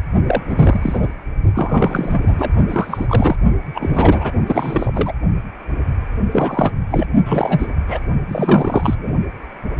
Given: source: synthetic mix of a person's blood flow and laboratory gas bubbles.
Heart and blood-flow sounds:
Doppler ultrasound of blood flow; precordium
0.26-0.43 s: bubbles
0.49-1.07 s: bubbles
1.54-2.33 s: bubbles
2.38-2.51 s: bubbles
2.69-3.36 s: bubbles
3.74-4.31 s: bubbles
4.47-5.14 s: bubbles
6.31-6.71 s: bubbles
6.91-7.06 s: bubbles
7.26-7.67 s: bubbles
7.88-7.99 s: bubbles
8.29-8.95 s: bubbles
8.98-9.12 s: bubbles
From the record:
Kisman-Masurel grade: 333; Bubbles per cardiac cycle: rolling drumbeat, 9 or more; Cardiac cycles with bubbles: 50 to 99%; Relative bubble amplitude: loud (0.450 to 0.775); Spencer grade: 3 (all of the cardiac periods contain showers or single bubble signals, but not dominating or overriding the cardiac motion signals); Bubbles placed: only in the low amplitude regions of the cardiac cycle

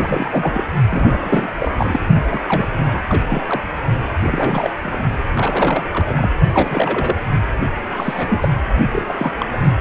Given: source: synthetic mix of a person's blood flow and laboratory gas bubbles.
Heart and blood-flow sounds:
Doppler ultrasound of blood flow; precordium
0.00-0.64 s: bubbles
0.90-1.51 s: bubbles
1.58-1.71 s: bubbles
1.77-2.00 s: bubbles
2.14-2.25 s: bubbles
2.29-2.68 s: bubbles
2.92-3.02 s: bubbles
3.08-3.42 s: bubbles
3.48-3.61 s: bubbles
4.22-4.72 s: bubbles
4.83-4.98 s: bubbles
5.35-5.85 s: bubbles
5.91-6.31 s: bubbles
6.52-7.14 s: bubbles
7.92-8.49 s: bubbles
8.91-9.14 s: bubbles
9.18-9.31 s: bubbles
9.38-9.46 s: bubbles
9.53-9.57 s: bubbles
9.64-9.77 s: bubbles
From the record:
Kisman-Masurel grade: 332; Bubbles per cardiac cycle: rolling drumbeat, 9 or more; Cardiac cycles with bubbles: 50 to 99%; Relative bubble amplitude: moderate (0.250 to 0.450); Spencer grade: 3 (all of the cardiac periods contain showers or single bubble signals, but not dominating or overriding the cardiac motion signals); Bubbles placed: only in the low amplitude regions of the cardiac cycle

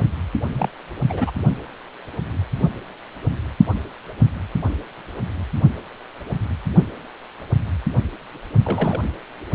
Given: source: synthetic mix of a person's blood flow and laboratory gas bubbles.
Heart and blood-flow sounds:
Doppler ultrasound of blood flow; precordium
0.52-0.69 s: bubbles
1.09-1.31 s: bubbles
8.64-9.00 s: bubbles
9.53-9.55 s: bubbles
From the record:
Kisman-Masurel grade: 222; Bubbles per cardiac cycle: several, 3 to 8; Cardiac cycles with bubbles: 10 to 50%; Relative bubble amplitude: moderate (0.250 to 0.450); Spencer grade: 2 (many but less than half of the cardiac periods contain bubble signals, singularly or in groups); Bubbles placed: only in the low amplitude regions of the cardiac cycle

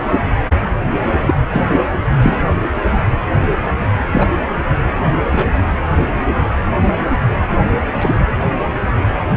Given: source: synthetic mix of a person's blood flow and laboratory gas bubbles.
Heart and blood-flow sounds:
Doppler ultrasound of blood flow; precordium
1.21-1.39 s: bubbles
1.52-1.64 s: bubbles
2.22-2.42 s: bubbles
4.11-4.27 s: bubbles
5.32-5.45 s: bubbles
5.97-6.05 s: bubbles
7.98-8.15 s: bubbles
From the record:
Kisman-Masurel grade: 123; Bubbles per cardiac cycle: 1 to 2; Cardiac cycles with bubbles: 10 to 50%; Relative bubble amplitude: loud (0.450 to 0.775); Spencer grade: 2 (many but less than half of the cardiac periods contain bubble signals, singularly or in groups); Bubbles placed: anywhere in the cardiac cycle

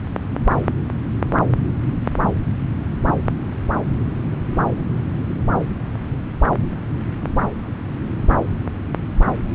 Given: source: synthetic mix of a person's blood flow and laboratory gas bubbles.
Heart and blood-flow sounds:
Doppler ultrasound of blood flow; subclavian vein
no bubbles
From the record:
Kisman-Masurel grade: 000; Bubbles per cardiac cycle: 0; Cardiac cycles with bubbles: 0%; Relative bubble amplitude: no bubbles discernible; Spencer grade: 0 (complete lack of bubble signals)

